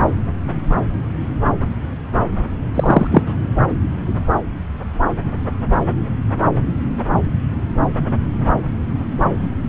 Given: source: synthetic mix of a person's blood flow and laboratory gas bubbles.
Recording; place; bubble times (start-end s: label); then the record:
Doppler ultrasound of blood flow; subclavian vein
2.75-3.07 s: bubbles
3.12-3.23 s: bubbles
3.26-3.34 s: bubbles
From the record:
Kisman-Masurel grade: 213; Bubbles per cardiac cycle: several, 3 to 8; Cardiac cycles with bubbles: 1 to 10%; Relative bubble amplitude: loud (0.450 to 0.775); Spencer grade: 1 (occasional bubble signal discernible with the cardiac motion signal, with majority of cardiac periods free of bubbles); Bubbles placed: anywhere in the cardiac cycle